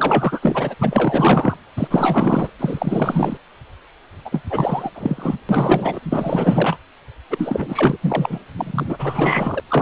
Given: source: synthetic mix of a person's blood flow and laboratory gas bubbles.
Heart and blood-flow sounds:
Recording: Doppler ultrasound of blood flow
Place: precordium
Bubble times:
0.00-0.40 s: bubbles
0.42-0.75 s: bubbles
0.79-1.56 s: bubbles
1.76-1.88 s: bubbles
1.91-2.52 s: bubbles
2.59-3.38 s: bubbles
4.25-4.42 s: bubbles
4.49-4.90 s: bubbles
4.95-5.36 s: bubbles
5.49-6.00 s: bubbles
6.03-6.77 s: bubbles
7.30-7.97 s: bubbles
8.02-8.39 s: bubbles
8.55-9.60 s: bubbles
9.68-9.81 s: bubbles
From the record:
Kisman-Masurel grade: 444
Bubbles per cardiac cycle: continuous sound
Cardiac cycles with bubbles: 100%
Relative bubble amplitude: maximal (0.775 to 0.999)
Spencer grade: 4 (maximum detectable bubble signal sounding continuously throughout systole and diastole of every cardiac period, and overriding the amplitude of the normal cardiac signals)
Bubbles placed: anywhere in the cardiac cycle

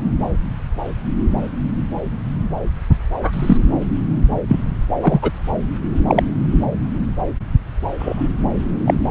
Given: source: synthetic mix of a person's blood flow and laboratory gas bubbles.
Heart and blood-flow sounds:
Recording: Doppler ultrasound of blood flow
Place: subclavian vein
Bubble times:
3.23-3.57 s: bubbles
4.47-4.62 s: bubbles
5.00-5.31 s: bubbles
6.07-6.23 s: bubbles
7.98-8.28 s: bubbles
8.85-8.94 s: bubbles
From the record:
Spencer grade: 2 (many but less than half of the cardiac periods contain bubble signals, singularly or in groups)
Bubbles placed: anywhere in the cardiac cycle

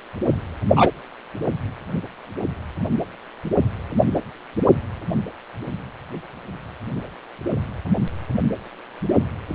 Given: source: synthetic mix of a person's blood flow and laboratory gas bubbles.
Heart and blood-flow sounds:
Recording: Doppler ultrasound of blood flow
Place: precordium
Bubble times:
0.75-0.91 s: bubbles
From the record:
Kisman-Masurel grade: 113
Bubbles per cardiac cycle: 1 to 2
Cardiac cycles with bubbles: 1 to 10%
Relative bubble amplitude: loud (0.450 to 0.775)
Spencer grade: 1 (occasional bubble signal discernible with the cardiac motion signal, with majority of cardiac periods free of bubbles)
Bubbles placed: anywhere in the cardiac cycle

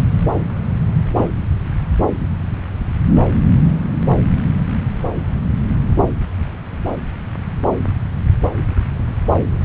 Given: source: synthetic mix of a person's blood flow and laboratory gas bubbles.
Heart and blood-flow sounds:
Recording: Doppler ultrasound of blood flow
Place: subclavian vein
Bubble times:
1.16-1.29 s: bubbles
From the record:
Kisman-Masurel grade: 122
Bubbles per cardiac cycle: 1 to 2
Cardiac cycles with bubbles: 10 to 50%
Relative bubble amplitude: moderate (0.250 to 0.450)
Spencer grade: 2 (many but less than half of the cardiac periods contain bubble signals, singularly or in groups)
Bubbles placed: anywhere in the cardiac cycle

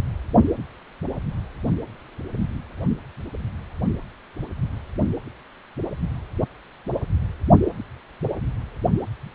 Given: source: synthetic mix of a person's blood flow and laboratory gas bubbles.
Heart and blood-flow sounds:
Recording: Doppler ultrasound of blood flow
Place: precordium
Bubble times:
no bubbles
From the record:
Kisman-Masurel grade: 000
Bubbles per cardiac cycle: 0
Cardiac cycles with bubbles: 0%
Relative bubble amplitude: no bubbles discernible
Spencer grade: 0 (complete lack of bubble signals)

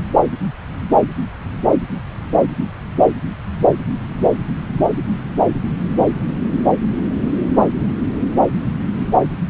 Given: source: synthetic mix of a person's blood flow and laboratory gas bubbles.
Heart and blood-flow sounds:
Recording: Doppler ultrasound of blood flow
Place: subclavian vein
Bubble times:
no bubbles
From the record:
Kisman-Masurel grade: 000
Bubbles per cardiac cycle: 0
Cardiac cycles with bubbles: 0%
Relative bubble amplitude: no bubbles discernible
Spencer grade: 0 (complete lack of bubble signals)

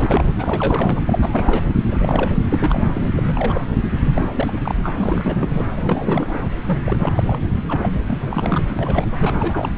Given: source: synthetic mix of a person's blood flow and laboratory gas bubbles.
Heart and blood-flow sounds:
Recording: Doppler ultrasound of blood flow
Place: subclavian vein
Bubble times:
0.00-0.26 s: bubbles
0.38-1.00 s: bubbles
1.06-1.62 s: bubbles
1.91-2.40 s: bubbles
2.50-3.02 s: bubbles
3.16-3.66 s: bubbles
4.02-4.33 s: bubbles
4.35-4.75 s: bubbles
4.83-4.92 s: bubbles
4.98-5.65 s: bubbles
5.77-6.39 s: bubbles
6.66-6.96 s: bubbles
7.00-7.23 s: bubbles
7.27-7.41 s: bubbles
7.67-7.90 s: bubbles
8.08-8.63 s: bubbles
8.79-9.05 s: bubbles
9.19-9.70 s: bubbles
From the record:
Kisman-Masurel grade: 342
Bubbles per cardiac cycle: rolling drumbeat, 9 or more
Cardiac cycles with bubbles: 100%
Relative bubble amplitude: moderate (0.250 to 0.450)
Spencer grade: 3 (all of the cardiac periods contain showers or single bubble signals, but not dominating or overriding the cardiac motion signals)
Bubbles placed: anywhere in the cardiac cycle

